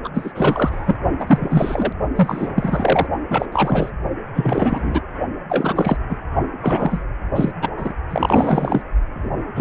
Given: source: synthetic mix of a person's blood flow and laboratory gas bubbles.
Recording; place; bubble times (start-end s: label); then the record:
Doppler ultrasound of blood flow; precordium
0.04-0.09 s: bubbles
0.14-0.96 s: bubbles
1.19-1.93 s: bubbles
2.15-3.07 s: bubbles
3.29-3.46 s: bubbles
3.52-3.90 s: bubbles
4.34-5.01 s: bubbles
5.49-5.97 s: bubbles
6.09-6.18 s: bubbles
6.61-7.04 s: bubbles
7.35-7.52 s: bubbles
7.61-7.70 s: bubbles
7.77-7.94 s: bubbles
8.10-8.82 s: bubbles
9.15-9.30 s: bubbles
9.54-9.61 s: bubbles
From the record:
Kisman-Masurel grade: 343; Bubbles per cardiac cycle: rolling drumbeat, 9 or more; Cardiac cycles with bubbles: 100%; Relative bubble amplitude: loud (0.450 to 0.775); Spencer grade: 3 (all of the cardiac periods contain showers or single bubble signals, but not dominating or overriding the cardiac motion signals); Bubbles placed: only in the low amplitude regions of the cardiac cycle